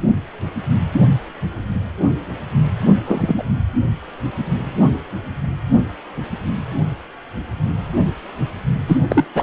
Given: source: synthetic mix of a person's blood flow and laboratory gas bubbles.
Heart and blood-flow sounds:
Doppler ultrasound of blood flow; precordium
3.06-3.44 s: bubbles
8.88-8.98 s: bubbles
9.08-9.27 s: bubbles
9.35-9.43 s: bubbles
From the record:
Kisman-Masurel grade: 223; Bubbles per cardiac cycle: several, 3 to 8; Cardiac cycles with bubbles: 10 to 50%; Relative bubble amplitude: loud (0.450 to 0.775); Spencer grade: 2 (many but less than half of the cardiac periods contain bubble signals, singularly or in groups); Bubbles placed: anywhere in the cardiac cycle

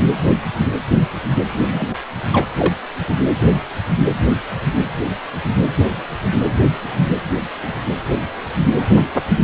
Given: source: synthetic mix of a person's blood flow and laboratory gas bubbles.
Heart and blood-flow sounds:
Doppler ultrasound of blood flow; precordium
1.66-1.95 s: bubbles
2.32-2.46 s: bubbles
2.57-2.73 s: bubbles
3.07-3.15 s: bubbles
From the record:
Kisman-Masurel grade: 122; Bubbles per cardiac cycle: 1 to 2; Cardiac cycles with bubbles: 10 to 50%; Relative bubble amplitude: moderate (0.250 to 0.450); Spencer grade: 2 (many but less than half of the cardiac periods contain bubble signals, singularly or in groups); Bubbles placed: anywhere in the cardiac cycle

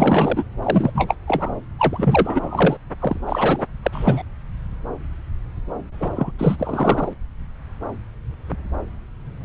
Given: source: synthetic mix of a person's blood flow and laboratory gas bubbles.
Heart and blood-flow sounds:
Doppler ultrasound of blood flow; subclavian vein
0.00-0.45 s: bubbles
0.62-0.91 s: bubbles
0.95-1.15 s: bubbles
1.28-1.51 s: bubbles
1.79-2.77 s: bubbles
3.00-3.19 s: bubbles
3.27-3.66 s: bubbles
3.82-4.22 s: bubbles
6.00-6.10 s: bubbles
6.15-6.31 s: bubbles
6.38-6.56 s: bubbles
6.58-7.13 s: bubbles
From the record:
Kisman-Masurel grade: 332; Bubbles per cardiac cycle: rolling drumbeat, 9 or more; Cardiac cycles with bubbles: 50 to 99%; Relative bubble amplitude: moderate (0.250 to 0.450); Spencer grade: 3 (all of the cardiac periods contain showers or single bubble signals, but not dominating or overriding the cardiac motion signals); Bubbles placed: anywhere in the cardiac cycle

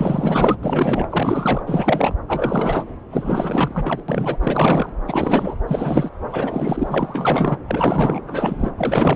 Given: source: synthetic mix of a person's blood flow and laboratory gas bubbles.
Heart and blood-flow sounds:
Doppler ultrasound of blood flow; subclavian vein
0.00-0.56 s: bubbles
0.62-1.08 s: bubbles
1.12-1.63 s: bubbles
1.66-2.15 s: bubbles
2.27-2.84 s: bubbles
3.10-4.03 s: bubbles
4.08-4.37 s: bubbles
4.40-4.90 s: bubbles
5.07-5.56 s: bubbles
5.67-6.10 s: bubbles
6.32-7.58 s: bubbles
7.67-8.22 s: bubbles
8.27-8.71 s: bubbles
8.77-9.16 s: bubbles
From the record:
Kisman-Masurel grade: 444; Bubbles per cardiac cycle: continuous sound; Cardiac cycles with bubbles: 100%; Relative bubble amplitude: maximal (0.775 to 0.999); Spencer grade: 4 (maximum detectable bubble signal sounding continuously throughout systole and diastole of every cardiac period, and overriding the amplitude of the normal cardiac signals); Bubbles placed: anywhere in the cardiac cycle

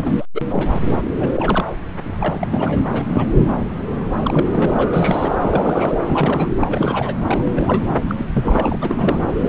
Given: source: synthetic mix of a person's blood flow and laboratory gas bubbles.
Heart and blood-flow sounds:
Doppler ultrasound of blood flow; subclavian vein
0.00-0.26 s: bubbles
0.34-0.42 s: bubbles
0.46-0.68 s: bubbles
1.19-1.65 s: bubbles
2.04-2.86 s: bubbles
2.90-3.06 s: bubbles
3.08-3.28 s: bubbles
4.21-4.47 s: bubbles
4.51-4.88 s: bubbles
4.93-5.38 s: bubbles
5.41-5.93 s: bubbles
6.07-6.48 s: bubbles
6.60-7.17 s: bubbles
7.27-7.84 s: bubbles
8.07-8.15 s: bubbles
8.18-8.26 s: bubbles
8.34-8.76 s: bubbles
8.81-9.25 s: bubbles
9.40-9.49 s: bubbles
From the record:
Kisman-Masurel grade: 332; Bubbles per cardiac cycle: rolling drumbeat, 9 or more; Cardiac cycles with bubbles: 50 to 99%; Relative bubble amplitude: moderate (0.250 to 0.450); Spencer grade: 3 (all of the cardiac periods contain showers or single bubble signals, but not dominating or overriding the cardiac motion signals); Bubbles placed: anywhere in the cardiac cycle

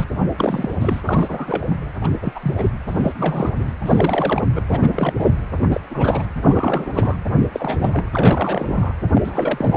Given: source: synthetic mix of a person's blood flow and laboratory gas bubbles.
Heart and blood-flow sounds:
Doppler ultrasound of blood flow; precordium
0.00-0.06 s: bubbles
0.38-0.74 s: bubbles
0.81-1.01 s: bubbles
1.05-1.65 s: bubbles
2.00-2.10 s: bubbles
2.22-2.54 s: bubbles
2.58-2.71 s: bubbles
2.87-3.14 s: bubbles
3.18-3.50 s: bubbles
3.56-3.73 s: bubbles
3.85-4.48 s: bubbles
4.54-4.62 s: bubbles
4.71-5.13 s: bubbles
5.19-5.35 s: bubbles
5.62-5.80 s: bubbles
5.90-6.25 s: bubbles
6.42-7.18 s: bubbles
7.41-7.45 s: bubbles
7.52-8.04 s: bubbles
8.12-8.93 s: bubbles
9.13-9.77 s: bubbles
From the record:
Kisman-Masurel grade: 342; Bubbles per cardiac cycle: rolling drumbeat, 9 or more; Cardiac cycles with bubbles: 100%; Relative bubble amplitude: moderate (0.250 to 0.450); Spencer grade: 3 (all of the cardiac periods contain showers or single bubble signals, but not dominating or overriding the cardiac motion signals); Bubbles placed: anywhere in the cardiac cycle

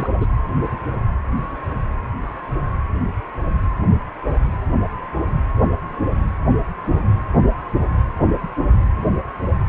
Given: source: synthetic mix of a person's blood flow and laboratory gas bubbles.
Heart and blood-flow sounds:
Doppler ultrasound of blood flow; precordium
0.00-0.06 s: bubbles
0.20-0.26 s: bubbles
From the record:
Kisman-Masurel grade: 213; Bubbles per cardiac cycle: several, 3 to 8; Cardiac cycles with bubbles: 1 to 10%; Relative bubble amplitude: loud (0.450 to 0.775); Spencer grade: 1 (occasional bubble signal discernible with the cardiac motion signal, with majority of cardiac periods free of bubbles); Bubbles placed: anywhere in the cardiac cycle

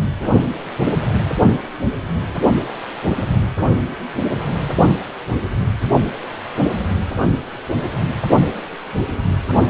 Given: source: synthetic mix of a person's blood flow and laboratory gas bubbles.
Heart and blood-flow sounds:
Doppler ultrasound of blood flow; precordium
0.00-0.02 s: bubbles
From the record:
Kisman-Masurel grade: 211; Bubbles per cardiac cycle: several, 3 to 8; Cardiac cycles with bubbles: 1 to 10%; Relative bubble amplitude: barely perceptible (0.100 to 0.250); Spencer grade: 1 (occasional bubble signal discernible with the cardiac motion signal, with majority of cardiac periods free of bubbles); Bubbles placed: only in the low amplitude regions of the cardiac cycle

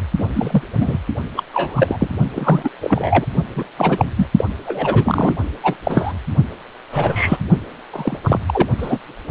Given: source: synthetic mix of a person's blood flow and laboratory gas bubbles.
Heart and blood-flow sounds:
Doppler ultrasound of blood flow; precordium
0.18-0.28 s: bubbles
0.34-0.62 s: bubbles
0.79-0.98 s: bubbles
1.36-1.43 s: bubbles
1.54-2.08 s: bubbles
2.33-2.70 s: bubbles
2.81-3.25 s: bubbles
3.56-3.64 s: bubbles
3.78-4.05 s: bubbles
4.17-4.27 s: bubbles
4.38-4.45 s: bubbles
4.66-5.34 s: bubbles
5.63-5.74 s: bubbles
5.85-6.13 s: bubbles
6.92-7.38 s: bubbles
7.92-8.18 s: bubbles
8.23-8.39 s: bubbles
8.47-8.67 s: bubbles
8.78-8.98 s: bubbles
From the record:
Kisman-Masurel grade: 243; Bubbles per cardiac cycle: several, 3 to 8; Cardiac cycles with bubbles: 100%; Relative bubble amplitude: loud (0.450 to 0.775); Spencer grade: 3 (all of the cardiac periods contain showers or single bubble signals, but not dominating or overriding the cardiac motion signals); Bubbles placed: only in the low amplitude regions of the cardiac cycle

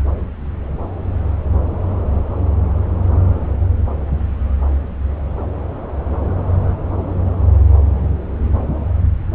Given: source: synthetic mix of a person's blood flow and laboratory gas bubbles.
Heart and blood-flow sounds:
Doppler ultrasound of blood flow; subclavian vein
no bubbles
From the record:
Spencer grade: 0 (complete lack of bubble signals)

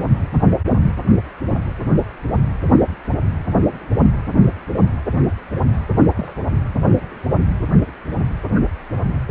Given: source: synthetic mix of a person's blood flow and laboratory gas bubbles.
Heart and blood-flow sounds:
Doppler ultrasound of blood flow; precordium
6.16-6.34 s: bubbles
From the record:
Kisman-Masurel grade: 111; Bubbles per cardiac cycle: 1 to 2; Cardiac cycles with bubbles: 1 to 10%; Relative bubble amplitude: barely perceptible (0.100 to 0.250); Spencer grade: 1 (occasional bubble signal discernible with the cardiac motion signal, with majority of cardiac periods free of bubbles); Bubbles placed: anywhere in the cardiac cycle

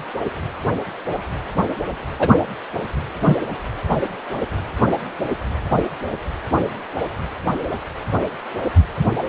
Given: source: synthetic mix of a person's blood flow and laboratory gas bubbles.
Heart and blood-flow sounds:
Doppler ultrasound of blood flow; precordium
2.19-2.29 s: bubbles
3.20-3.37 s: bubbles
From the record:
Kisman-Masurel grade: 123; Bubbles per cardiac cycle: 1 to 2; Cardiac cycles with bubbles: 10 to 50%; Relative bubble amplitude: loud (0.450 to 0.775); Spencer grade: 2 (many but less than half of the cardiac periods contain bubble signals, singularly or in groups); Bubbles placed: anywhere in the cardiac cycle

